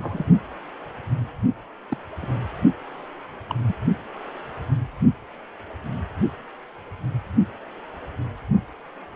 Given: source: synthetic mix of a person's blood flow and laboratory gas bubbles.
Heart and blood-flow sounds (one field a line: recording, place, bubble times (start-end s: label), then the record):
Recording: Doppler ultrasound of blood flow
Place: precordium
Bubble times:
0.00-0.30 s: bubbles
1.90-1.96 s: bubbles
2.22-2.27 s: bubbles
3.49-3.54 s: bubbles
3.67-3.75 s: bubbles
From the record:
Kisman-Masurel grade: 121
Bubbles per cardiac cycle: 1 to 2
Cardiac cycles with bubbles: 10 to 50%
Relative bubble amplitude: barely perceptible (0.100 to 0.250)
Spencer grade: 2 (many but less than half of the cardiac periods contain bubble signals, singularly or in groups)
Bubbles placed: anywhere in the cardiac cycle